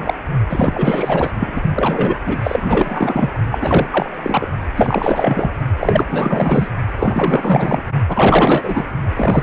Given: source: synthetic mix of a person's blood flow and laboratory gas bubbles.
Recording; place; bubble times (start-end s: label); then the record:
Doppler ultrasound of blood flow; precordium
0.00-0.14 s: bubbles
0.49-1.30 s: bubbles
1.39-1.62 s: bubbles
1.75-2.15 s: bubbles
2.25-2.37 s: bubbles
2.43-3.30 s: bubbles
3.51-3.58 s: bubbles
3.61-3.88 s: bubbles
3.92-4.09 s: bubbles
4.23-4.47 s: bubbles
4.75-5.50 s: bubbles
5.78-6.68 s: bubbles
6.98-7.81 s: bubbles
8.08-8.85 s: bubbles
9.16-9.43 s: bubbles
From the record:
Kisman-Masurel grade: 444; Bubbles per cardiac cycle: continuous sound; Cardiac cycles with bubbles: 100%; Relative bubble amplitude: maximal (0.775 to 0.999); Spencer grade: 4 (maximum detectable bubble signal sounding continuously throughout systole and diastole of every cardiac period, and overriding the amplitude of the normal cardiac signals); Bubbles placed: only in the low amplitude regions of the cardiac cycle